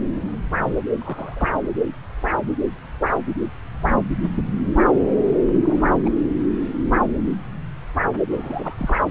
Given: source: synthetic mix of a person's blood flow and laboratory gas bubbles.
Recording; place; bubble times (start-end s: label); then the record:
Doppler ultrasound of blood flow; subclavian vein
0.97-1.49 s: bubbles
5.26-5.35 s: bubbles
5.46-5.96 s: bubbles
6.04-6.10 s: bubbles
8.30-9.00 s: bubbles
From the record:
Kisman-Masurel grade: 221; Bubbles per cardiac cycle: several, 3 to 8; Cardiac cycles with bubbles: 10 to 50%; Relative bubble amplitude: barely perceptible (0.100 to 0.250); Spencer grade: 2 (many but less than half of the cardiac periods contain bubble signals, singularly or in groups); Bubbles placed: anywhere in the cardiac cycle